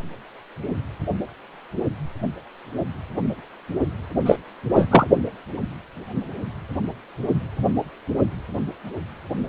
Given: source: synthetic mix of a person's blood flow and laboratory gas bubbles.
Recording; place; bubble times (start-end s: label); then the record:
Doppler ultrasound of blood flow; precordium
4.25-4.36 s: bubbles
4.75-5.06 s: bubbles
From the record:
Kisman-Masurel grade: 213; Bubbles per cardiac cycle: several, 3 to 8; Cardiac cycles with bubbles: 1 to 10%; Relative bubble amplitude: loud (0.450 to 0.775); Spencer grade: 1 (occasional bubble signal discernible with the cardiac motion signal, with majority of cardiac periods free of bubbles); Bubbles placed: only in the low amplitude regions of the cardiac cycle